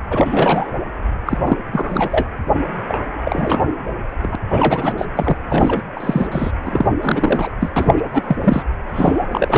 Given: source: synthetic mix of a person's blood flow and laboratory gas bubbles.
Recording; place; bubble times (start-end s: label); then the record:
Doppler ultrasound of blood flow; precordium
0.10-0.75 s: bubbles
1.26-1.39 s: bubbles
1.46-1.57 s: bubbles
1.72-2.25 s: bubbles
2.88-3.05 s: bubbles
3.25-3.65 s: bubbles
4.21-4.35 s: bubbles
4.50-4.94 s: bubbles
4.97-5.05 s: bubbles
5.15-5.37 s: bubbles
5.49-5.82 s: bubbles
5.96-6.27 s: bubbles
6.31-6.51 s: bubbles
6.63-6.90 s: bubbles
7.01-7.51 s: bubbles
7.59-7.70 s: bubbles
7.76-8.37 s: bubbles
8.42-8.62 s: bubbles
8.94-9.28 s: bubbles
9.32-9.58 s: bubbles
From the record:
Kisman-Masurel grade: 343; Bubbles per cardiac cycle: rolling drumbeat, 9 or more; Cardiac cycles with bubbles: 100%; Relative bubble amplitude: loud (0.450 to 0.775); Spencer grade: 3 (all of the cardiac periods contain showers or single bubble signals, but not dominating or overriding the cardiac motion signals); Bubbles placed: anywhere in the cardiac cycle